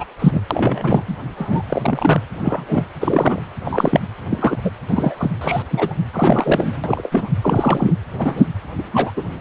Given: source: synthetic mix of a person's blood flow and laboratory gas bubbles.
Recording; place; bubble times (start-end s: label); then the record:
Doppler ultrasound of blood flow; precordium
0.00-0.05 s: bubbles
0.19-0.41 s: bubbles
0.51-1.03 s: bubbles
1.07-1.15 s: bubbles
1.36-1.62 s: bubbles
1.68-2.21 s: bubbles
2.34-2.85 s: bubbles
3.00-3.42 s: bubbles
3.65-4.00 s: bubbles
4.30-4.57 s: bubbles
4.65-4.71 s: bubbles
4.88-5.15 s: bubbles
5.17-5.31 s: bubbles
5.41-5.62 s: bubbles
5.71-5.94 s: bubbles
6.13-7.29 s: bubbles
7.41-7.94 s: bubbles
8.18-8.46 s: bubbles
8.78-8.83 s: bubbles
8.94-9.11 s: bubbles
9.17-9.26 s: bubbles
From the record:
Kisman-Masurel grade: 243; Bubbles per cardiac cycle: several, 3 to 8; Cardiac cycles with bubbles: 100%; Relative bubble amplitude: loud (0.450 to 0.775); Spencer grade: 3 (all of the cardiac periods contain showers or single bubble signals, but not dominating or overriding the cardiac motion signals); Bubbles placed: anywhere in the cardiac cycle